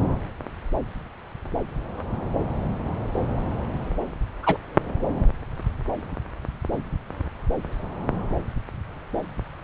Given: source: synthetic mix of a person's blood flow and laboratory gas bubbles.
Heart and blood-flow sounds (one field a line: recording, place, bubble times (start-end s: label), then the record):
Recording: Doppler ultrasound of blood flow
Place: subclavian vein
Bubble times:
4.43-4.57 s: bubbles
From the record:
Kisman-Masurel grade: 112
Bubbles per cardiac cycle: 1 to 2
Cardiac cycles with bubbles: 1 to 10%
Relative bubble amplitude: moderate (0.250 to 0.450)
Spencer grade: 1 (occasional bubble signal discernible with the cardiac motion signal, with majority of cardiac periods free of bubbles)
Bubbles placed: anywhere in the cardiac cycle